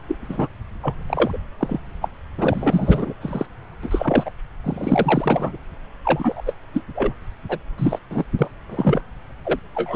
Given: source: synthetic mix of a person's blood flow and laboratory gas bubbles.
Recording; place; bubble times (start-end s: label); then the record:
Doppler ultrasound of blood flow; subclavian vein
0.08-0.15 s: bubbles
0.29-0.48 s: bubbles
0.81-1.02 s: bubbles
1.06-1.39 s: bubbles
1.59-1.79 s: bubbles
2.02-2.08 s: bubbles
2.38-3.13 s: bubbles
3.21-3.46 s: bubbles
3.83-4.31 s: bubbles
4.64-5.57 s: bubbles
6.04-6.42 s: bubbles
6.46-6.54 s: bubbles
6.73-6.84 s: bubbles
6.95-7.14 s: bubbles
7.49-7.59 s: bubbles
7.78-7.99 s: bubbles
8.10-8.25 s: bubbles
8.39-8.49 s: bubbles
8.70-9.02 s: bubbles
9.45-9.59 s: bubbles
9.75-9.96 s: bubbles
From the record:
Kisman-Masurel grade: 243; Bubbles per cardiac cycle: several, 3 to 8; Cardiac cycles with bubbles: 100%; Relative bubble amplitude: loud (0.450 to 0.775); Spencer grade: 3 (all of the cardiac periods contain showers or single bubble signals, but not dominating or overriding the cardiac motion signals); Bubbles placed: anywhere in the cardiac cycle